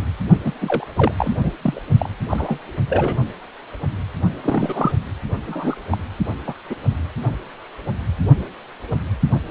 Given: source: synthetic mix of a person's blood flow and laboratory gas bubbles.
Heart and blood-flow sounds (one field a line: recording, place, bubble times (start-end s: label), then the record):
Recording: Doppler ultrasound of blood flow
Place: precordium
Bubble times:
0.45-0.52 s: bubbles
0.61-0.84 s: bubbles
0.96-1.12 s: bubbles
1.16-1.35 s: bubbles
1.42-1.53 s: bubbles
1.61-1.82 s: bubbles
1.98-2.10 s: bubbles
2.29-2.58 s: bubbles
2.89-3.17 s: bubbles
4.43-4.92 s: bubbles
5.47-5.83 s: bubbles
5.91-5.98 s: bubbles
6.47-6.54 s: bubbles
6.70-6.76 s: bubbles
From the record:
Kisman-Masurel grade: 222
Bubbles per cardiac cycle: several, 3 to 8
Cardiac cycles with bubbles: 10 to 50%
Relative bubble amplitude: moderate (0.250 to 0.450)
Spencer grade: 2 (many but less than half of the cardiac periods contain bubble signals, singularly or in groups)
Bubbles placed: only in the low amplitude regions of the cardiac cycle